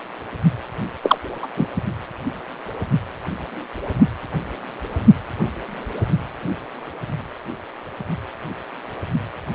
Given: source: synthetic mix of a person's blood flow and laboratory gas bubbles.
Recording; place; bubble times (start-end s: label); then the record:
Doppler ultrasound of blood flow; precordium
1.02-1.18 s: bubbles
1.42-1.47 s: bubbles
1.56-1.65 s: bubbles
From the record:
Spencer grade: 1 (occasional bubble signal discernible with the cardiac motion signal, with majority of cardiac periods free of bubbles); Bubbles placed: only in the low amplitude regions of the cardiac cycle